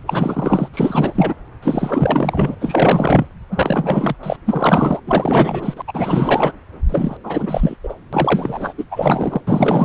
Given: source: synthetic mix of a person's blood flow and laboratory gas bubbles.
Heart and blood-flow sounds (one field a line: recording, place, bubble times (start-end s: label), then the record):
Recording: Doppler ultrasound of blood flow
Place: subclavian vein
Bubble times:
0.07-0.68 s: bubbles
0.73-1.34 s: bubbles
1.62-2.54 s: bubbles
2.60-3.27 s: bubbles
3.50-4.16 s: bubbles
4.23-4.37 s: bubbles
4.46-5.00 s: bubbles
5.07-5.82 s: bubbles
5.87-6.53 s: bubbles
6.89-7.17 s: bubbles
7.24-7.76 s: bubbles
7.83-7.94 s: bubbles
8.12-8.73 s: bubbles
8.78-8.85 s: bubbles
8.91-9.41 s: bubbles
9.47-9.84 s: bubbles
From the record:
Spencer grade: 4 (maximum detectable bubble signal sounding continuously throughout systole and diastole of every cardiac period, and overriding the amplitude of the normal cardiac signals)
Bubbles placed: anywhere in the cardiac cycle